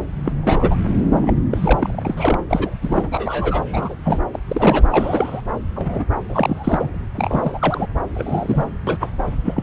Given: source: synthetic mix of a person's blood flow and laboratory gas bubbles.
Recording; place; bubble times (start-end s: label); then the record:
Doppler ultrasound of blood flow; subclavian vein
0.24-0.33 s: bubbles
0.43-0.77 s: bubbles
1.21-1.33 s: bubbles
1.51-2.38 s: bubbles
2.49-2.77 s: bubbles
2.81-3.08 s: bubbles
3.11-3.63 s: bubbles
3.72-3.95 s: bubbles
4.04-4.20 s: bubbles
4.33-4.39 s: bubbles
4.48-4.83 s: bubbles
4.90-5.42 s: bubbles
5.75-6.04 s: bubbles
6.29-7.00 s: bubbles
7.16-7.87 s: bubbles
8.14-8.70 s: bubbles
8.87-9.10 s: bubbles
9.45-9.63 s: bubbles
From the record:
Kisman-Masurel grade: 242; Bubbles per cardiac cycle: several, 3 to 8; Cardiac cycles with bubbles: 100%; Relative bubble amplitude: moderate (0.250 to 0.450); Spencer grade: 3 (all of the cardiac periods contain showers or single bubble signals, but not dominating or overriding the cardiac motion signals); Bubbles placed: anywhere in the cardiac cycle